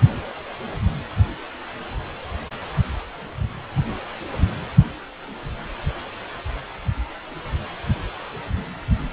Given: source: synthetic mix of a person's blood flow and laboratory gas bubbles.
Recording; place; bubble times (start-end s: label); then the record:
Doppler ultrasound of blood flow; precordium
no bubbles
From the record:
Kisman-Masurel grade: 000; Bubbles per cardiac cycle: 0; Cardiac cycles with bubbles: 0%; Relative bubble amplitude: no bubbles discernible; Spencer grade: 0 (complete lack of bubble signals)